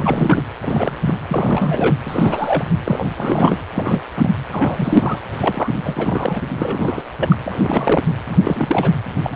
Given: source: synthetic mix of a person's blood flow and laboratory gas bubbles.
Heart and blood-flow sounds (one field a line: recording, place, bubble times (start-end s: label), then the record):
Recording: Doppler ultrasound of blood flow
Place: precordium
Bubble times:
0.00-0.42 s: bubbles
0.62-1.20 s: bubbles
1.28-1.96 s: bubbles
2.05-2.64 s: bubbles
2.85-3.58 s: bubbles
3.74-4.01 s: bubbles
4.16-4.30 s: bubbles
4.51-5.20 s: bubbles
5.40-5.68 s: bubbles
5.83-6.41 s: bubbles
6.54-7.02 s: bubbles
7.19-7.38 s: bubbles
7.44-8.03 s: bubbles
8.29-8.91 s: bubbles
9.23-9.36 s: bubbles
From the record:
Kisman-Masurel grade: 332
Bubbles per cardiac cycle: rolling drumbeat, 9 or more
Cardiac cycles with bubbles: 50 to 99%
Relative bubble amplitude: moderate (0.250 to 0.450)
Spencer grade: 3 (all of the cardiac periods contain showers or single bubble signals, but not dominating or overriding the cardiac motion signals)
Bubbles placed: anywhere in the cardiac cycle